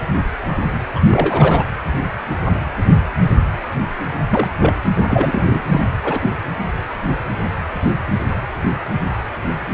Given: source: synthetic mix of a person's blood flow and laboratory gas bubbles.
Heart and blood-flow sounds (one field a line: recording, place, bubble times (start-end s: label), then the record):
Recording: Doppler ultrasound of blood flow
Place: precordium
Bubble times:
0.93-1.00 s: bubbles
1.11-1.64 s: bubbles
4.30-4.50 s: bubbles
4.60-4.73 s: bubbles
5.08-5.62 s: bubbles
5.71-5.81 s: bubbles
6.03-6.31 s: bubbles
From the record:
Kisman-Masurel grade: 222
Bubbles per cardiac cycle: several, 3 to 8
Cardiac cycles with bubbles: 10 to 50%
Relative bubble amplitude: moderate (0.250 to 0.450)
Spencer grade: 2 (many but less than half of the cardiac periods contain bubble signals, singularly or in groups)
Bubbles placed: anywhere in the cardiac cycle